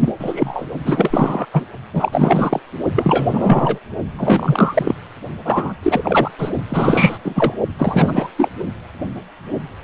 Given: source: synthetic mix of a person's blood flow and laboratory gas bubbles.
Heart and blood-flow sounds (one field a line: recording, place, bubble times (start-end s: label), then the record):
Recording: Doppler ultrasound of blood flow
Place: precordium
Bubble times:
0.00-0.12 s: bubbles
0.19-0.66 s: bubbles
0.84-1.45 s: bubbles
1.53-1.66 s: bubbles
1.93-2.60 s: bubbles
2.95-3.79 s: bubbles
4.18-4.93 s: bubbles
5.44-5.73 s: bubbles
5.82-6.31 s: bubbles
6.38-6.50 s: bubbles
6.68-7.18 s: bubbles
7.24-7.54 s: bubbles
7.78-8.30 s: bubbles
8.37-8.49 s: bubbles
From the record:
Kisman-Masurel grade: 333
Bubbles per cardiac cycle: rolling drumbeat, 9 or more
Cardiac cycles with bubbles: 50 to 99%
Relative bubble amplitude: loud (0.450 to 0.775)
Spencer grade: 3 (all of the cardiac periods contain showers or single bubble signals, but not dominating or overriding the cardiac motion signals)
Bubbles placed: only in the low amplitude regions of the cardiac cycle